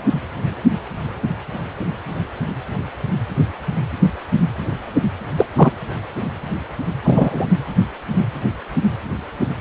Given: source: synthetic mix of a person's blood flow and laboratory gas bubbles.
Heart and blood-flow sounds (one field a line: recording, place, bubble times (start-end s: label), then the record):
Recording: Doppler ultrasound of blood flow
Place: precordium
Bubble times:
5.37-5.46 s: bubbles
5.56-5.71 s: bubbles
7.04-7.46 s: bubbles
From the record:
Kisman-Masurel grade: 113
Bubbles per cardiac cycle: 1 to 2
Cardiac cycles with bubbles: 1 to 10%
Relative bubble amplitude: loud (0.450 to 0.775)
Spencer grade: 1 (occasional bubble signal discernible with the cardiac motion signal, with majority of cardiac periods free of bubbles)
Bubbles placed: anywhere in the cardiac cycle